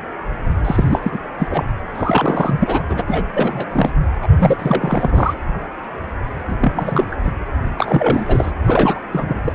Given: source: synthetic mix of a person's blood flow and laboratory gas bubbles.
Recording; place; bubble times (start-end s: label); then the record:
Doppler ultrasound of blood flow; precordium
0.65-1.00 s: bubbles
1.03-1.19 s: bubbles
1.39-1.65 s: bubbles
1.95-2.83 s: bubbles
2.89-3.03 s: bubbles
3.07-3.23 s: bubbles
3.33-3.67 s: bubbles
3.74-3.92 s: bubbles
4.22-4.28 s: bubbles
4.38-5.34 s: bubbles
6.48-6.56 s: bubbles
6.60-7.16 s: bubbles
7.24-7.33 s: bubbles
7.75-8.52 s: bubbles
8.65-9.00 s: bubbles
9.12-9.53 s: bubbles
From the record:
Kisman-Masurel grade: 333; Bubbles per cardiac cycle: rolling drumbeat, 9 or more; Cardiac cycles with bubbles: 50 to 99%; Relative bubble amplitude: loud (0.450 to 0.775); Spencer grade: 3 (all of the cardiac periods contain showers or single bubble signals, but not dominating or overriding the cardiac motion signals); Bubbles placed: anywhere in the cardiac cycle